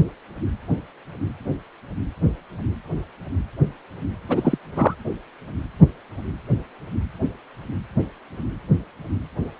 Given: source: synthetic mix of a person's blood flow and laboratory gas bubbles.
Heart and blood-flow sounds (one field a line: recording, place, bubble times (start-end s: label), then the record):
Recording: Doppler ultrasound of blood flow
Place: precordium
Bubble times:
4.29-4.58 s: bubbles
4.76-4.94 s: bubbles
From the record:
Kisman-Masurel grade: 212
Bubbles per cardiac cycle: several, 3 to 8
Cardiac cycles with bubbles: 1 to 10%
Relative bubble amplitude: moderate (0.250 to 0.450)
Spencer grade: 1 (occasional bubble signal discernible with the cardiac motion signal, with majority of cardiac periods free of bubbles)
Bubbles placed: anywhere in the cardiac cycle